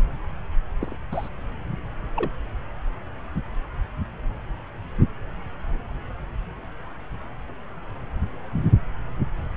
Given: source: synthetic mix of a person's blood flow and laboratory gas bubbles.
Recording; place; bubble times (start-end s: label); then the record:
Doppler ultrasound of blood flow; subclavian vein
0.81-0.96 s: bubbles
1.11-1.29 s: bubbles
2.16-2.31 s: bubbles
From the record:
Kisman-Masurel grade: 121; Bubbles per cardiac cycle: 1 to 2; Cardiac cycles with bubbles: 10 to 50%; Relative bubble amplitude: barely perceptible (0.100 to 0.250); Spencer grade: 2 (many but less than half of the cardiac periods contain bubble signals, singularly or in groups); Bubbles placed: anywhere in the cardiac cycle